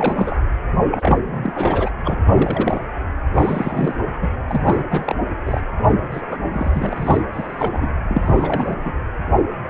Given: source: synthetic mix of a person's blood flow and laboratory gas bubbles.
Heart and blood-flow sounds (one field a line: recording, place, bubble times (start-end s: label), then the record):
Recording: Doppler ultrasound of blood flow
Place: precordium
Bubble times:
0.00-0.36 s: bubbles
0.91-1.18 s: bubbles
1.24-1.91 s: bubbles
2.04-2.18 s: bubbles
2.33-2.86 s: bubbles
3.33-3.95 s: bubbles
4.07-4.12 s: bubbles
4.21-4.29 s: bubbles
4.50-4.85 s: bubbles
4.90-5.16 s: bubbles
5.45-5.61 s: bubbles
5.83-5.94 s: bubbles
6.12-6.38 s: bubbles
6.53-7.22 s: bubbles
7.33-7.97 s: bubbles
8.08-8.76 s: bubbles
8.80-8.93 s: bubbles
From the record:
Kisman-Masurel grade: 332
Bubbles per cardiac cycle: rolling drumbeat, 9 or more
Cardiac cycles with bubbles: 50 to 99%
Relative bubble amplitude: moderate (0.250 to 0.450)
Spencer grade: 3 (all of the cardiac periods contain showers or single bubble signals, but not dominating or overriding the cardiac motion signals)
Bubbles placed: anywhere in the cardiac cycle